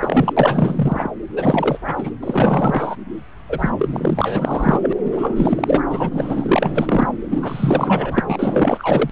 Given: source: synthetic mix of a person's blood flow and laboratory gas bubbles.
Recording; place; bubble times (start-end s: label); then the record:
Doppler ultrasound of blood flow; subclavian vein
0.00-0.33 s: bubbles
0.36-1.09 s: bubbles
1.35-1.78 s: bubbles
1.86-2.11 s: bubbles
2.22-2.96 s: bubbles
3.49-3.70 s: bubbles
3.78-4.93 s: bubbles
5.04-5.81 s: bubbles
5.89-7.08 s: bubbles
7.30-9.10 s: bubbles
From the record:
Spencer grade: 4 (maximum detectable bubble signal sounding continuously throughout systole and diastole of every cardiac period, and overriding the amplitude of the normal cardiac signals); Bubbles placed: anywhere in the cardiac cycle